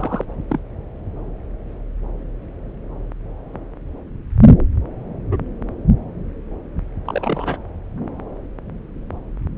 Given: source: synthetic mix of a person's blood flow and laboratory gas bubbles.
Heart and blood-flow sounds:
Doppler ultrasound of blood flow; subclavian vein
0.00-0.25 s: bubbles
0.49-0.59 s: bubbles
5.31-5.38 s: bubbles
7.05-7.58 s: bubbles
From the record:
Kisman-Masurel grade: 122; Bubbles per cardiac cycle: 1 to 2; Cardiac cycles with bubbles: 10 to 50%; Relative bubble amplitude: moderate (0.250 to 0.450); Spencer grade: 2 (many but less than half of the cardiac periods contain bubble signals, singularly or in groups); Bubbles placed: anywhere in the cardiac cycle

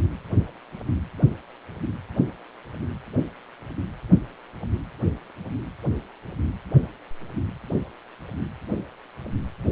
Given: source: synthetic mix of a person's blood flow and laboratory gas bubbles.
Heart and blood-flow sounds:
Doppler ultrasound of blood flow; precordium
no bubbles
From the record:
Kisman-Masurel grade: 000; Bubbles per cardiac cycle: 0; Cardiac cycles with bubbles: 0%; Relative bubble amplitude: no bubbles discernible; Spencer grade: 0 (complete lack of bubble signals)

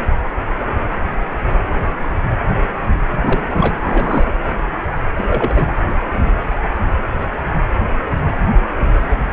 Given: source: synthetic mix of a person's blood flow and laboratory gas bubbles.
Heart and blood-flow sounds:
Doppler ultrasound of blood flow; precordium
3.11-3.78 s: bubbles
3.81-4.31 s: bubbles
5.17-5.63 s: bubbles
From the record:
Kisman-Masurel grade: 222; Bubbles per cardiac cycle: several, 3 to 8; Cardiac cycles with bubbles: 10 to 50%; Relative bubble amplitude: moderate (0.250 to 0.450); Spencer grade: 2 (many but less than half of the cardiac periods contain bubble signals, singularly or in groups); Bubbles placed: anywhere in the cardiac cycle

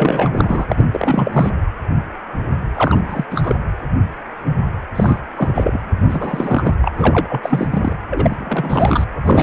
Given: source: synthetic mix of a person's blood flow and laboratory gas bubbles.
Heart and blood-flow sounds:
Doppler ultrasound of blood flow; precordium
0.00-0.66 s: bubbles
0.71-0.83 s: bubbles
0.93-1.51 s: bubbles
2.75-3.25 s: bubbles
3.30-3.55 s: bubbles
4.95-5.19 s: bubbles
5.36-5.79 s: bubbles
6.09-6.75 s: bubbles
6.82-6.92 s: bubbles
6.98-7.93 s: bubbles
8.10-9.04 s: bubbles
9.24-9.43 s: bubbles
From the record:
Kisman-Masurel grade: 332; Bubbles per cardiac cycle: rolling drumbeat, 9 or more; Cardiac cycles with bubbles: 50 to 99%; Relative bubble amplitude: moderate (0.250 to 0.450); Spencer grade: 3 (all of the cardiac periods contain showers or single bubble signals, but not dominating or overriding the cardiac motion signals); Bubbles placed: anywhere in the cardiac cycle

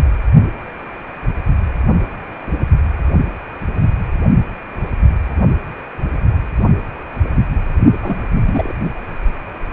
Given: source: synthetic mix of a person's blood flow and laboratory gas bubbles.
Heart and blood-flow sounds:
Doppler ultrasound of blood flow; precordium
8.02-8.22 s: bubbles
8.30-8.76 s: bubbles
From the record:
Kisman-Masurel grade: 212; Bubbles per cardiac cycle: several, 3 to 8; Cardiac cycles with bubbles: 1 to 10%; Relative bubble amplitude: moderate (0.250 to 0.450); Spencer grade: 1 (occasional bubble signal discernible with the cardiac motion signal, with majority of cardiac periods free of bubbles); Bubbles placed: only in the low amplitude regions of the cardiac cycle

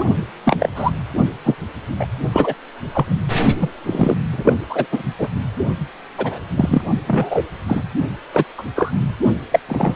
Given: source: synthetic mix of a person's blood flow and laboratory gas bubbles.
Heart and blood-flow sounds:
Doppler ultrasound of blood flow; precordium
0.00-0.06 s: bubbles
0.45-0.56 s: bubbles
0.59-0.69 s: bubbles
0.75-0.91 s: bubbles
1.44-1.55 s: bubbles
1.99-2.06 s: bubbles
2.32-2.54 s: bubbles
2.92-3.16 s: bubbles
3.60-3.71 s: bubbles
3.86-4.17 s: bubbles
4.32-4.54 s: bubbles
4.69-4.87 s: bubbles
4.91-5.03 s: bubbles
5.18-5.28 s: bubbles
6.17-6.40 s: bubbles
6.56-6.82 s: bubbles
7.07-7.43 s: bubbles
7.67-7.83 s: bubbles
8.34-8.45 s: bubbles
8.58-8.63 s: bubbles
8.76-8.92 s: bubbles
9.52-9.60 s: bubbles
9.69-9.95 s: bubbles
From the record:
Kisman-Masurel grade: 243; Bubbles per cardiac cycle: several, 3 to 8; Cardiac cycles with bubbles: 100%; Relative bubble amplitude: loud (0.450 to 0.775); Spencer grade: 3 (all of the cardiac periods contain showers or single bubble signals, but not dominating or overriding the cardiac motion signals); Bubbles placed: only in the low amplitude regions of the cardiac cycle

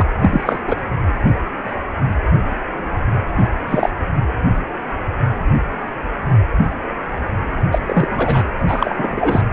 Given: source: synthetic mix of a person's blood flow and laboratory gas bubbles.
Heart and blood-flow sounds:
Doppler ultrasound of blood flow; precordium
0.00-0.02 s: bubbles
0.19-0.60 s: bubbles
0.67-0.76 s: bubbles
3.38-3.50 s: bubbles
3.67-3.89 s: bubbles
7.71-7.81 s: bubbles
7.86-8.43 s: bubbles
8.68-9.46 s: bubbles
From the record:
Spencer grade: 3 (all of the cardiac periods contain showers or single bubble signals, but not dominating or overriding the cardiac motion signals); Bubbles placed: anywhere in the cardiac cycle

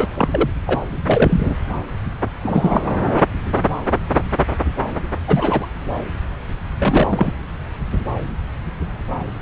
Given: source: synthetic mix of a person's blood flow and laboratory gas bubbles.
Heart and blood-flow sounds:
Doppler ultrasound of blood flow; subclavian vein
0.00-0.07 s: bubbles
0.14-0.49 s: bubbles
0.66-0.81 s: bubbles
1.04-1.55 s: bubbles
2.43-2.81 s: bubbles
5.27-5.67 s: bubbles
6.79-7.32 s: bubbles
From the record:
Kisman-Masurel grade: 233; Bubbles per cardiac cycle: several, 3 to 8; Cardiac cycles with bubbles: 50 to 99%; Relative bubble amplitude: loud (0.450 to 0.775); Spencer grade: 3 (all of the cardiac periods contain showers or single bubble signals, but not dominating or overriding the cardiac motion signals); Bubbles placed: anywhere in the cardiac cycle

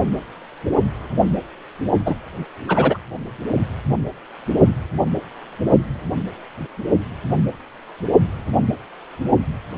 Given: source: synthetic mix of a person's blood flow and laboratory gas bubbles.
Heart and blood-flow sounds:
Doppler ultrasound of blood flow; precordium
2.05-2.15 s: bubbles
2.68-2.98 s: bubbles
From the record:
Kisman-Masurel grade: 223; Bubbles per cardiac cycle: several, 3 to 8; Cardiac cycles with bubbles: 10 to 50%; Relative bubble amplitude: loud (0.450 to 0.775); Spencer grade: 2 (many but less than half of the cardiac periods contain bubble signals, singularly or in groups); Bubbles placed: only in the low amplitude regions of the cardiac cycle

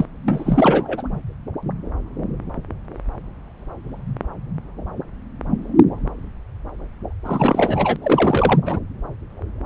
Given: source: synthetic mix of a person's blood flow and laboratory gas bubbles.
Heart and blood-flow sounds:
Doppler ultrasound of blood flow; subclavian vein
0.00-0.05 s: bubbles
0.28-1.03 s: bubbles
7.25-7.96 s: bubbles
8.03-8.60 s: bubbles
8.66-8.79 s: bubbles
From the record:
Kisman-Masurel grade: 332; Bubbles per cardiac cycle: rolling drumbeat, 9 or more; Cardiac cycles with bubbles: 50 to 99%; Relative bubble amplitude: moderate (0.250 to 0.450); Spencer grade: 3 (all of the cardiac periods contain showers or single bubble signals, but not dominating or overriding the cardiac motion signals); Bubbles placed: anywhere in the cardiac cycle

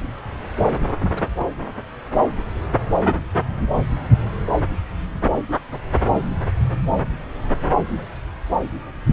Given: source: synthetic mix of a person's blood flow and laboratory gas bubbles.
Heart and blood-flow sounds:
Doppler ultrasound of blood flow; subclavian vein
1.14-1.26 s: bubbles
1.37-1.46 s: bubbles
4.52-4.58 s: bubbles
7.76-8.05 s: bubbles
From the record:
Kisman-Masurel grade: 121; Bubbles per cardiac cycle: 1 to 2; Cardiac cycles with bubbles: 10 to 50%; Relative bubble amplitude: barely perceptible (0.100 to 0.250); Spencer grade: 2 (many but less than half of the cardiac periods contain bubble signals, singularly or in groups); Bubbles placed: anywhere in the cardiac cycle

